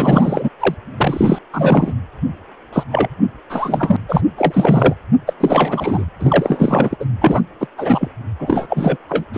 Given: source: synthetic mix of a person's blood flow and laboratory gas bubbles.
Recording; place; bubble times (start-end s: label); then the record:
Doppler ultrasound of blood flow; precordium
0.00-0.49 s: bubbles
0.59-0.74 s: bubbles
0.97-1.39 s: bubbles
1.53-1.94 s: bubbles
2.73-2.83 s: bubbles
2.91-3.08 s: bubbles
3.50-3.97 s: bubbles
4.09-4.21 s: bubbles
4.38-4.95 s: bubbles
5.27-5.33 s: bubbles
5.40-6.05 s: bubbles
6.19-6.96 s: bubbles
6.99-7.04 s: bubbles
7.21-7.41 s: bubbles
7.60-7.66 s: bubbles
7.78-8.09 s: bubbles
8.38-8.97 s: bubbles
9.09-9.25 s: bubbles
9.33-9.38 s: bubbles
From the record:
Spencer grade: 3 (all of the cardiac periods contain showers or single bubble signals, but not dominating or overriding the cardiac motion signals); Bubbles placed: anywhere in the cardiac cycle